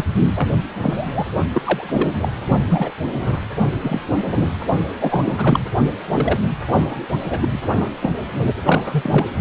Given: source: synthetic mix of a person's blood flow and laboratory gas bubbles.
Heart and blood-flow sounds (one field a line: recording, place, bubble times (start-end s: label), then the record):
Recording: Doppler ultrasound of blood flow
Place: precordium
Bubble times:
0.00-0.04 s: bubbles
0.35-0.48 s: bubbles
0.81-1.25 s: bubbles
1.54-2.29 s: bubbles
2.69-2.92 s: bubbles
3.20-3.40 s: bubbles
3.81-4.00 s: bubbles
4.10-4.15 s: bubbles
4.36-4.46 s: bubbles
5.00-5.21 s: bubbles
5.25-5.59 s: bubbles
6.10-6.39 s: bubbles
6.67-7.01 s: bubbles
7.30-7.39 s: bubbles
7.42-7.48 s: bubbles
7.51-7.58 s: bubbles
7.68-7.87 s: bubbles
8.00-8.11 s: bubbles
8.65-9.29 s: bubbles
From the record:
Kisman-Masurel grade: 243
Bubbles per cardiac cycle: several, 3 to 8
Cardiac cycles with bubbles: 100%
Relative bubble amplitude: loud (0.450 to 0.775)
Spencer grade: 3 (all of the cardiac periods contain showers or single bubble signals, but not dominating or overriding the cardiac motion signals)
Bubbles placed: only in the low amplitude regions of the cardiac cycle